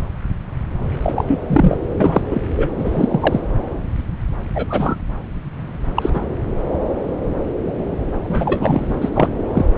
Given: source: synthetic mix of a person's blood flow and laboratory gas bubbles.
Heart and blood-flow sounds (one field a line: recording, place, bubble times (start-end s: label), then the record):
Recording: Doppler ultrasound of blood flow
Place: subclavian vein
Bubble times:
1.02-1.24 s: bubbles
1.27-1.39 s: bubbles
1.46-1.77 s: bubbles
2.00-2.42 s: bubbles
2.57-2.68 s: bubbles
2.77-3.40 s: bubbles
4.54-4.97 s: bubbles
5.96-6.25 s: bubbles
8.23-8.97 s: bubbles
9.00-9.10 s: bubbles
9.13-9.29 s: bubbles
9.53-9.65 s: bubbles
From the record:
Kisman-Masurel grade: 233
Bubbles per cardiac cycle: several, 3 to 8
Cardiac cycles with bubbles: 50 to 99%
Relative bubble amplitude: loud (0.450 to 0.775)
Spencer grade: 3 (all of the cardiac periods contain showers or single bubble signals, but not dominating or overriding the cardiac motion signals)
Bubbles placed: anywhere in the cardiac cycle